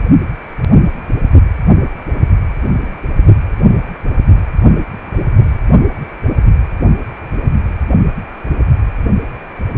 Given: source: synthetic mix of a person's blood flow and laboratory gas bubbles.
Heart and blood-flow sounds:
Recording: Doppler ultrasound of blood flow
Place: precordium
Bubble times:
5.04-5.35 s: bubbles
5.38-5.57 s: bubbles
From the record:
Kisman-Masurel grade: 121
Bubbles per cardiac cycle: 1 to 2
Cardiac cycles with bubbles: 10 to 50%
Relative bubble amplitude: barely perceptible (0.100 to 0.250)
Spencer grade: 2 (many but less than half of the cardiac periods contain bubble signals, singularly or in groups)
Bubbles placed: only in the low amplitude regions of the cardiac cycle

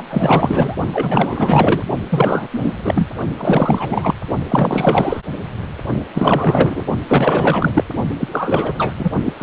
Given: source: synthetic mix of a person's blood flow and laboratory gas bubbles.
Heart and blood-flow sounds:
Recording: Doppler ultrasound of blood flow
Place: precordium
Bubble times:
0.00-0.02 s: bubbles
0.10-0.74 s: bubbles
0.92-1.83 s: bubbles
2.10-2.48 s: bubbles
2.51-2.72 s: bubbles
2.84-3.08 s: bubbles
3.38-4.15 s: bubbles
4.49-5.23 s: bubbles
6.14-6.85 s: bubbles
7.08-7.84 s: bubbles
8.20-8.28 s: bubbles
8.31-8.93 s: bubbles
8.98-9.12 s: bubbles
9.25-9.34 s: bubbles
9.38-9.43 s: bubbles
From the record:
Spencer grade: 4 (maximum detectable bubble signal sounding continuously throughout systole and diastole of every cardiac period, and overriding the amplitude of the normal cardiac signals)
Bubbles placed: only in the low amplitude regions of the cardiac cycle

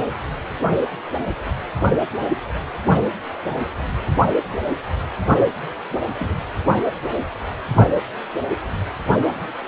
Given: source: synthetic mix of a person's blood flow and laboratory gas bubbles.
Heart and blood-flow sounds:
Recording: Doppler ultrasound of blood flow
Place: precordium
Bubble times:
6.19-6.35 s: bubbles
From the record:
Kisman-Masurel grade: 111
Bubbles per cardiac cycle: 1 to 2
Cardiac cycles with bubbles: 1 to 10%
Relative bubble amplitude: barely perceptible (0.100 to 0.250)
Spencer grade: 1 (occasional bubble signal discernible with the cardiac motion signal, with majority of cardiac periods free of bubbles)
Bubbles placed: only in the low amplitude regions of the cardiac cycle

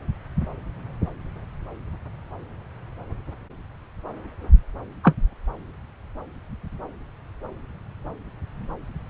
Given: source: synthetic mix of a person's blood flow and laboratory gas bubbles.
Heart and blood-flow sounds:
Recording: Doppler ultrasound of blood flow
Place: subclavian vein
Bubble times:
5.04-5.15 s: bubbles
From the record:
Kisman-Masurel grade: 113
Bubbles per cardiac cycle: 1 to 2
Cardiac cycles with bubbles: 1 to 10%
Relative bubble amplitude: loud (0.450 to 0.775)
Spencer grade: 1 (occasional bubble signal discernible with the cardiac motion signal, with majority of cardiac periods free of bubbles)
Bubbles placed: anywhere in the cardiac cycle

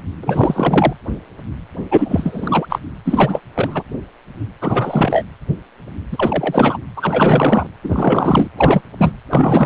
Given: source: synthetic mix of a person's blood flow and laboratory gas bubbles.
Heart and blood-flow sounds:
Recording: Doppler ultrasound of blood flow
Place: precordium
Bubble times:
0.22-0.93 s: bubbles
1.91-2.66 s: bubbles
2.70-2.79 s: bubbles
3.05-3.40 s: bubbles
3.56-3.83 s: bubbles
4.61-5.25 s: bubbles
6.11-6.77 s: bubbles
6.96-7.67 s: bubbles
7.83-8.48 s: bubbles
8.57-8.81 s: bubbles
8.99-9.12 s: bubbles
9.30-9.66 s: bubbles
From the record:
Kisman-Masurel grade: 333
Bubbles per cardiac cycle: rolling drumbeat, 9 or more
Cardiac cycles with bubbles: 50 to 99%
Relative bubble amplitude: loud (0.450 to 0.775)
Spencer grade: 3 (all of the cardiac periods contain showers or single bubble signals, but not dominating or overriding the cardiac motion signals)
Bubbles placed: anywhere in the cardiac cycle

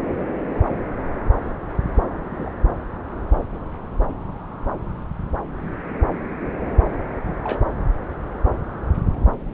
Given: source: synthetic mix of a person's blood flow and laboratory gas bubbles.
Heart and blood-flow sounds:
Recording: Doppler ultrasound of blood flow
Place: subclavian vein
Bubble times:
2.31-2.52 s: bubbles
7.43-7.60 s: bubbles
From the record:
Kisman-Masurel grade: 111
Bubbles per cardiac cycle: 1 to 2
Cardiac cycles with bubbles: 1 to 10%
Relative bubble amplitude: barely perceptible (0.100 to 0.250)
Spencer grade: 1 (occasional bubble signal discernible with the cardiac motion signal, with majority of cardiac periods free of bubbles)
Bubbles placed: anywhere in the cardiac cycle

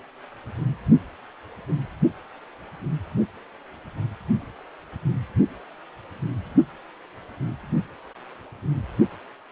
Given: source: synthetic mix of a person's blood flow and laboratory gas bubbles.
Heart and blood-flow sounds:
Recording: Doppler ultrasound of blood flow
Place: precordium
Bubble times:
no bubbles
From the record:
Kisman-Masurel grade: 000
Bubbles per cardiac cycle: 0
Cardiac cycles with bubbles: 0%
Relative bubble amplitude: no bubbles discernible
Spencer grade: 0 (complete lack of bubble signals)

